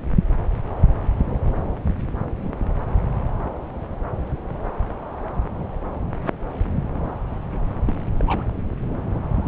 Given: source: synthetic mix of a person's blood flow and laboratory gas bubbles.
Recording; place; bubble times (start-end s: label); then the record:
Doppler ultrasound of blood flow; subclavian vein
2.42-2.53 s: bubbles
7.86-7.93 s: bubbles
8.18-8.43 s: bubbles
From the record:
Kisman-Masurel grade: 121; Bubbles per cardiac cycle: 1 to 2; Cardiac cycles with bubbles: 10 to 50%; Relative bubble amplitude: barely perceptible (0.100 to 0.250); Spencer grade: 2 (many but less than half of the cardiac periods contain bubble signals, singularly or in groups); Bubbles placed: anywhere in the cardiac cycle